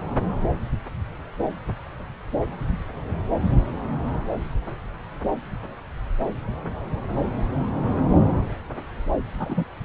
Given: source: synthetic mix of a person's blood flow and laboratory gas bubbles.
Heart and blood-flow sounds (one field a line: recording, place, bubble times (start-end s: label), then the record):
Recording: Doppler ultrasound of blood flow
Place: subclavian vein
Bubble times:
9.39-9.64 s: bubbles
From the record:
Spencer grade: 1 (occasional bubble signal discernible with the cardiac motion signal, with majority of cardiac periods free of bubbles)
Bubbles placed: anywhere in the cardiac cycle